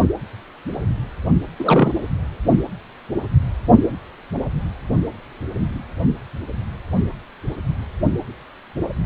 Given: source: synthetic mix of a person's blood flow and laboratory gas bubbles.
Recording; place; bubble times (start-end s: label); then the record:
Doppler ultrasound of blood flow; precordium
1.59-1.92 s: bubbles
2.03-2.08 s: bubbles
From the record:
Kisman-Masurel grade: 212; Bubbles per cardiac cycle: several, 3 to 8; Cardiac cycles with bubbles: 1 to 10%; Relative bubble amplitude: moderate (0.250 to 0.450); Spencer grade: 1 (occasional bubble signal discernible with the cardiac motion signal, with majority of cardiac periods free of bubbles); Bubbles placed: only in the low amplitude regions of the cardiac cycle